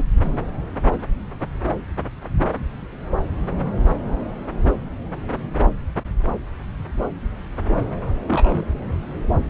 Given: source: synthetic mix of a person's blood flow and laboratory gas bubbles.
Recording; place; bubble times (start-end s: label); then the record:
Doppler ultrasound of blood flow; subclavian vein
8.27-8.65 s: bubbles
From the record:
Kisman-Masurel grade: 112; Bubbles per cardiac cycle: 1 to 2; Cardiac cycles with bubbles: 1 to 10%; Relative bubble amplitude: moderate (0.250 to 0.450); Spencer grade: 1 (occasional bubble signal discernible with the cardiac motion signal, with majority of cardiac periods free of bubbles); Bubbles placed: anywhere in the cardiac cycle